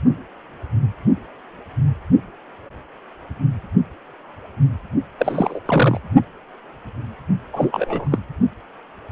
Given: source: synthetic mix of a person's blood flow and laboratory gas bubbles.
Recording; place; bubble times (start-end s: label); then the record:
Doppler ultrasound of blood flow; precordium
5.18-5.59 s: bubbles
5.66-6.00 s: bubbles
7.53-8.07 s: bubbles
8.12-8.18 s: bubbles
From the record:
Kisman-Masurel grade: 223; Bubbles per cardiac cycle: several, 3 to 8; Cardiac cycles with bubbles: 10 to 50%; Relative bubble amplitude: loud (0.450 to 0.775); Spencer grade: 2 (many but less than half of the cardiac periods contain bubble signals, singularly or in groups); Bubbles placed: only in the low amplitude regions of the cardiac cycle